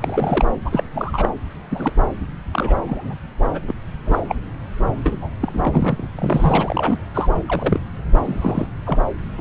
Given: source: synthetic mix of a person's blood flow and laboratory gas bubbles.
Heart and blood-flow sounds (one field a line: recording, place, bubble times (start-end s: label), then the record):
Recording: Doppler ultrasound of blood flow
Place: subclavian vein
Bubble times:
0.02-0.45 s: bubbles
0.65-0.83 s: bubbles
0.93-1.28 s: bubbles
1.70-1.92 s: bubbles
2.52-2.79 s: bubbles
2.87-3.15 s: bubbles
3.53-3.61 s: bubbles
3.67-3.73 s: bubbles
4.06-4.19 s: bubbles
4.29-4.35 s: bubbles
5.04-5.28 s: bubbles
5.42-6.07 s: bubbles
6.15-6.99 s: bubbles
7.14-7.29 s: bubbles
7.48-7.80 s: bubbles
8.24-8.67 s: bubbles
8.86-8.97 s: bubbles
9.38-9.41 s: bubbles
From the record:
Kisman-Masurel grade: 242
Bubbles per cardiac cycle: several, 3 to 8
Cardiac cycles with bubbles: 100%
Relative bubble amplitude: moderate (0.250 to 0.450)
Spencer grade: 3 (all of the cardiac periods contain showers or single bubble signals, but not dominating or overriding the cardiac motion signals)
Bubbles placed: anywhere in the cardiac cycle